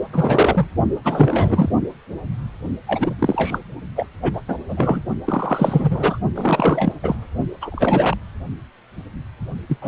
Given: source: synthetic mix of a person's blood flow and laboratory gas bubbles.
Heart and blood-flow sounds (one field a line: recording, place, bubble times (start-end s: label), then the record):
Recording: Doppler ultrasound of blood flow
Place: precordium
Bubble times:
0.13-0.67 s: bubbles
1.04-1.69 s: bubbles
2.87-3.14 s: bubbles
3.19-3.59 s: bubbles
3.96-4.07 s: bubbles
4.22-4.42 s: bubbles
4.48-4.58 s: bubbles
4.69-5.02 s: bubbles
5.25-6.17 s: bubbles
6.36-6.95 s: bubbles
7.03-7.16 s: bubbles
7.61-8.17 s: bubbles
9.69-9.78 s: bubbles
9.81-9.88 s: bubbles
From the record:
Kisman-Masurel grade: 332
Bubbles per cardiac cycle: rolling drumbeat, 9 or more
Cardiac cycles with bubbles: 50 to 99%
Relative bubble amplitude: moderate (0.250 to 0.450)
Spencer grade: 3 (all of the cardiac periods contain showers or single bubble signals, but not dominating or overriding the cardiac motion signals)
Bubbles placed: only in the low amplitude regions of the cardiac cycle